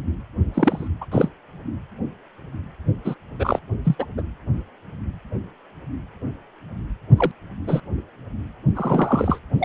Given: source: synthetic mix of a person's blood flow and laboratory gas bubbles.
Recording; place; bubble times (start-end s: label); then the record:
Doppler ultrasound of blood flow; precordium
0.54-0.88 s: bubbles
1.00-1.06 s: bubbles
1.11-1.30 s: bubbles
3.04-3.15 s: bubbles
3.39-3.59 s: bubbles
3.84-3.96 s: bubbles
3.98-4.06 s: bubbles
4.17-4.23 s: bubbles
7.17-7.32 s: bubbles
7.67-7.80 s: bubbles
8.75-9.38 s: bubbles
9.58-9.65 s: bubbles
From the record:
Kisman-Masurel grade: 233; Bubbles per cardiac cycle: several, 3 to 8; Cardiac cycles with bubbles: 50 to 99%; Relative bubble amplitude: loud (0.450 to 0.775); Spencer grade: 3 (all of the cardiac periods contain showers or single bubble signals, but not dominating or overriding the cardiac motion signals); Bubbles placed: only in the low amplitude regions of the cardiac cycle